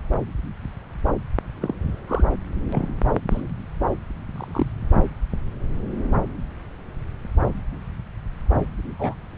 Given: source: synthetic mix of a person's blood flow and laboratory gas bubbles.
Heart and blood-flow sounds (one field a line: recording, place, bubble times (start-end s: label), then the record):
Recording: Doppler ultrasound of blood flow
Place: subclavian vein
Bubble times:
1.60-1.75 s: bubbles
2.08-2.23 s: bubbles
2.70-2.97 s: bubbles
3.31-3.42 s: bubbles
4.35-4.72 s: bubbles
8.99-9.15 s: bubbles
From the record:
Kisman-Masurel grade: 122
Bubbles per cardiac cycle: 1 to 2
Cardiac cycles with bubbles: 10 to 50%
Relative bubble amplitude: moderate (0.250 to 0.450)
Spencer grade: 2 (many but less than half of the cardiac periods contain bubble signals, singularly or in groups)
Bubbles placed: anywhere in the cardiac cycle